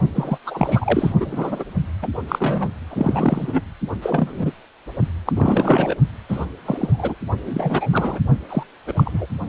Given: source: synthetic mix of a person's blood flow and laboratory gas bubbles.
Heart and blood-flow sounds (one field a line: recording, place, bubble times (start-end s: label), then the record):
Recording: Doppler ultrasound of blood flow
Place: precordium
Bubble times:
0.15-0.38 s: bubbles
0.45-1.13 s: bubbles
1.20-1.64 s: bubbles
2.02-2.08 s: bubbles
2.28-2.71 s: bubbles
2.90-3.61 s: bubbles
4.02-4.51 s: bubbles
5.25-5.33 s: bubbles
5.36-5.95 s: bubbles
6.29-6.46 s: bubbles
6.65-7.15 s: bubbles
7.46-7.88 s: bubbles
7.92-8.19 s: bubbles
8.49-8.63 s: bubbles
8.87-8.93 s: bubbles
8.96-9.26 s: bubbles
From the record:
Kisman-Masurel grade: 232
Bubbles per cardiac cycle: several, 3 to 8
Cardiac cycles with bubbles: 50 to 99%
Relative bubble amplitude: moderate (0.250 to 0.450)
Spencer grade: 3 (all of the cardiac periods contain showers or single bubble signals, but not dominating or overriding the cardiac motion signals)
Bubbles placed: only in the low amplitude regions of the cardiac cycle